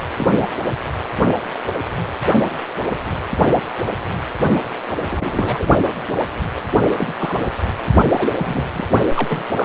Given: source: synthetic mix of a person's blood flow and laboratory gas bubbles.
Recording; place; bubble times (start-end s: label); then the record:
Doppler ultrasound of blood flow; precordium
0.17-0.27 s: bubbles
0.39-0.47 s: bubbles
5.05-5.67 s: bubbles
6.98-7.15 s: bubbles
7.18-7.46 s: bubbles
8.12-8.28 s: bubbles
8.38-8.69 s: bubbles
8.73-8.87 s: bubbles
9.16-9.42 s: bubbles
9.55-9.65 s: bubbles
From the record:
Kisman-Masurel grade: 232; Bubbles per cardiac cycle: several, 3 to 8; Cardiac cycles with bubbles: 50 to 99%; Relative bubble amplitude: moderate (0.250 to 0.450); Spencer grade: 3 (all of the cardiac periods contain showers or single bubble signals, but not dominating or overriding the cardiac motion signals); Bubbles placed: only in the low amplitude regions of the cardiac cycle